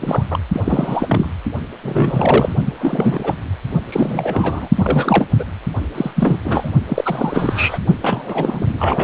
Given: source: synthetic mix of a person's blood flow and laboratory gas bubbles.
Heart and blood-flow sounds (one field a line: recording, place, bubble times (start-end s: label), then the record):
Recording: Doppler ultrasound of blood flow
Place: precordium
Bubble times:
0.00-0.24 s: bubbles
0.30-0.39 s: bubbles
0.53-0.61 s: bubbles
0.64-1.29 s: bubbles
1.83-2.55 s: bubbles
2.65-2.73 s: bubbles
2.78-3.35 s: bubbles
3.88-4.69 s: bubbles
4.75-5.28 s: bubbles
5.39-5.45 s: bubbles
5.95-6.11 s: bubbles
6.16-6.38 s: bubbles
6.44-6.70 s: bubbles
6.88-7.79 s: bubbles
8.03-9.04 s: bubbles
From the record:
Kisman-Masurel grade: 342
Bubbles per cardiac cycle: rolling drumbeat, 9 or more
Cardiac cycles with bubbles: 100%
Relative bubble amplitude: moderate (0.250 to 0.450)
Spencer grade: 3 (all of the cardiac periods contain showers or single bubble signals, but not dominating or overriding the cardiac motion signals)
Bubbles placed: only in the low amplitude regions of the cardiac cycle